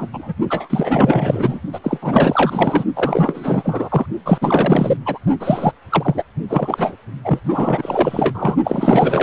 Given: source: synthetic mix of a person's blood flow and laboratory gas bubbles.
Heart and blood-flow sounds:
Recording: Doppler ultrasound of blood flow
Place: precordium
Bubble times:
0.00-0.07 s: bubbles
0.12-0.33 s: bubbles
0.50-1.59 s: bubbles
1.72-1.79 s: bubbles
1.83-2.84 s: bubbles
2.96-4.06 s: bubbles
4.25-4.38 s: bubbles
4.41-4.97 s: bubbles
5.05-5.19 s: bubbles
5.40-5.71 s: bubbles
5.90-6.24 s: bubbles
6.49-6.96 s: bubbles
7.24-7.39 s: bubbles
7.44-8.56 s: bubbles
8.64-9.23 s: bubbles
From the record:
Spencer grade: 4 (maximum detectable bubble signal sounding continuously throughout systole and diastole of every cardiac period, and overriding the amplitude of the normal cardiac signals)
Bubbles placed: only in the low amplitude regions of the cardiac cycle

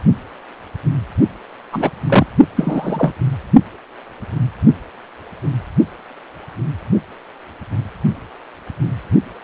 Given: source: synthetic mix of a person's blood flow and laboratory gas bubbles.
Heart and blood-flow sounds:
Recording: Doppler ultrasound of blood flow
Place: precordium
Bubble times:
1.72-1.90 s: bubbles
2.08-2.27 s: bubbles
2.56-3.12 s: bubbles
From the record:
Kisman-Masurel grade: 123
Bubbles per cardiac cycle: 1 to 2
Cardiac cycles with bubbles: 10 to 50%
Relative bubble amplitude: loud (0.450 to 0.775)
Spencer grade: 2 (many but less than half of the cardiac periods contain bubble signals, singularly or in groups)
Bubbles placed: only in the low amplitude regions of the cardiac cycle

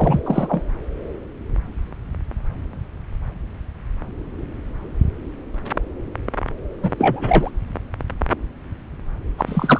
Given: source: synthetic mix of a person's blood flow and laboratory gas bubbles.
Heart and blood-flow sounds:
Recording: Doppler ultrasound of blood flow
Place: subclavian vein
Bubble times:
0.00-0.20 s: bubbles
0.26-0.63 s: bubbles
6.82-6.92 s: bubbles
6.98-7.50 s: bubbles
9.38-9.80 s: bubbles
From the record:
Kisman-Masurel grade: 223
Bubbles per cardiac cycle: several, 3 to 8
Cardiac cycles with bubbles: 10 to 50%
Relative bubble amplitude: loud (0.450 to 0.775)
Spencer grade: 2 (many but less than half of the cardiac periods contain bubble signals, singularly or in groups)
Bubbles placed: anywhere in the cardiac cycle

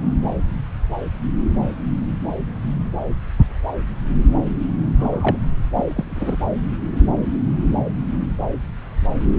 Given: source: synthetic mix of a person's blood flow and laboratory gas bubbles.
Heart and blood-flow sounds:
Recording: Doppler ultrasound of blood flow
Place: subclavian vein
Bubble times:
4.98-5.39 s: bubbles
5.74-6.37 s: bubbles
From the record:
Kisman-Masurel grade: 222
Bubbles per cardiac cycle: several, 3 to 8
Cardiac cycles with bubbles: 10 to 50%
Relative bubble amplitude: moderate (0.250 to 0.450)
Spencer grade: 2 (many but less than half of the cardiac periods contain bubble signals, singularly or in groups)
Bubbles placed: anywhere in the cardiac cycle

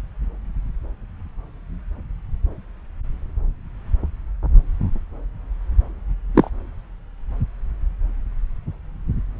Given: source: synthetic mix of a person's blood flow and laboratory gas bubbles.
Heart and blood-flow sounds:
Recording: Doppler ultrasound of blood flow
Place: subclavian vein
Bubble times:
6.34-6.50 s: bubbles
From the record:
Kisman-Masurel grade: 113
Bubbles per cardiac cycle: 1 to 2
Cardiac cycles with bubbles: 1 to 10%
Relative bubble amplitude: loud (0.450 to 0.775)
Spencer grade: 1 (occasional bubble signal discernible with the cardiac motion signal, with majority of cardiac periods free of bubbles)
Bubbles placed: anywhere in the cardiac cycle

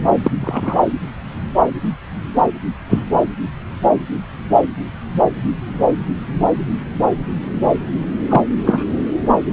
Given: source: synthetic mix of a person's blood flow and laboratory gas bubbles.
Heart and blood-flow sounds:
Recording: Doppler ultrasound of blood flow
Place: subclavian vein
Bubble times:
0.23-0.32 s: bubbles
0.41-0.80 s: bubbles
2.89-3.04 s: bubbles
8.29-8.41 s: bubbles
8.66-8.84 s: bubbles
From the record:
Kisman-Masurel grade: 123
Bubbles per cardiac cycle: 1 to 2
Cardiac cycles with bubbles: 10 to 50%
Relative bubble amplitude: loud (0.450 to 0.775)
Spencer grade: 2 (many but less than half of the cardiac periods contain bubble signals, singularly or in groups)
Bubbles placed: anywhere in the cardiac cycle

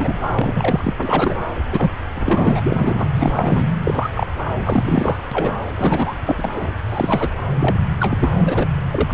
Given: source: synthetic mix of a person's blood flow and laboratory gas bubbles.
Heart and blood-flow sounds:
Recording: Doppler ultrasound of blood flow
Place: subclavian vein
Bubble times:
0.00-0.21 s: bubbles
0.35-0.94 s: bubbles
1.02-1.41 s: bubbles
1.71-1.96 s: bubbles
2.15-3.08 s: bubbles
3.15-3.64 s: bubbles
3.83-4.10 s: bubbles
4.15-4.27 s: bubbles
4.59-5.20 s: bubbles
5.31-5.53 s: bubbles
5.75-6.15 s: bubbles
6.25-6.54 s: bubbles
6.56-6.67 s: bubbles
6.88-7.30 s: bubbles
7.59-7.79 s: bubbles
8.00-8.31 s: bubbles
8.46-8.69 s: bubbles
8.92-9.14 s: bubbles
From the record:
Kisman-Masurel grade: 242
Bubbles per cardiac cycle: several, 3 to 8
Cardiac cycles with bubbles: 100%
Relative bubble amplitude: moderate (0.250 to 0.450)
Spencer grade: 3 (all of the cardiac periods contain showers or single bubble signals, but not dominating or overriding the cardiac motion signals)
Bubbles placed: anywhere in the cardiac cycle

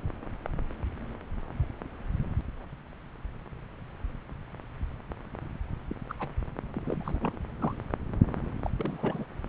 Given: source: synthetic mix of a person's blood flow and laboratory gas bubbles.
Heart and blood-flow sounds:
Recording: Doppler ultrasound of blood flow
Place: subclavian vein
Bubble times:
5.89-5.95 s: bubbles
6.08-6.14 s: bubbles
6.20-6.29 s: bubbles
6.74-7.37 s: bubbles
7.59-7.75 s: bubbles
8.63-8.70 s: bubbles
8.76-9.24 s: bubbles
From the record:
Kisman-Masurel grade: 221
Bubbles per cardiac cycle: several, 3 to 8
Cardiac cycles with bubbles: 10 to 50%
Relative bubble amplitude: barely perceptible (0.100 to 0.250)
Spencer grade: 2 (many but less than half of the cardiac periods contain bubble signals, singularly or in groups)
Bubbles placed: anywhere in the cardiac cycle

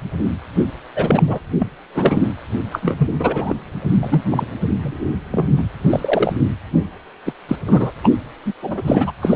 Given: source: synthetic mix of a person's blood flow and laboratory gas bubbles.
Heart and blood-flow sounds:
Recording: Doppler ultrasound of blood flow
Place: precordium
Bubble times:
0.95-1.41 s: bubbles
1.59-1.68 s: bubbles
1.94-2.33 s: bubbles
2.71-2.79 s: bubbles
2.82-3.09 s: bubbles
3.19-3.55 s: bubbles
4.00-4.23 s: bubbles
4.31-4.46 s: bubbles
4.82-5.09 s: bubbles
5.31-5.47 s: bubbles
5.57-5.64 s: bubbles
5.90-6.33 s: bubbles
7.25-7.33 s: bubbles
7.48-7.56 s: bubbles
7.67-7.92 s: bubbles
8.03-8.10 s: bubbles
8.45-8.54 s: bubbles
8.62-9.11 s: bubbles
9.21-9.36 s: bubbles
From the record:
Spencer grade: 3 (all of the cardiac periods contain showers or single bubble signals, but not dominating or overriding the cardiac motion signals)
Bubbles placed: anywhere in the cardiac cycle

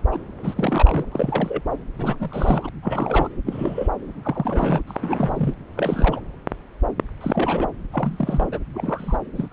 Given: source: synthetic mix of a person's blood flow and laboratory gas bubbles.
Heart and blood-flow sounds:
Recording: Doppler ultrasound of blood flow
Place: subclavian vein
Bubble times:
0.11-0.18 s: bubbles
0.39-1.06 s: bubbles
1.11-1.61 s: bubbles
1.98-2.69 s: bubbles
2.83-3.30 s: bubbles
3.46-3.89 s: bubbles
4.23-4.81 s: bubbles
4.87-5.54 s: bubbles
5.77-6.20 s: bubbles
7.20-7.67 s: bubbles
7.92-8.48 s: bubbles
8.52-8.59 s: bubbles
8.74-9.18 s: bubbles
9.35-9.49 s: bubbles
9.51-9.53 s: bubbles
From the record:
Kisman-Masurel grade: 232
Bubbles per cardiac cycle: several, 3 to 8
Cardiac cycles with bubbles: 50 to 99%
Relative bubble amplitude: moderate (0.250 to 0.450)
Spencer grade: 3 (all of the cardiac periods contain showers or single bubble signals, but not dominating or overriding the cardiac motion signals)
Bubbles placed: anywhere in the cardiac cycle

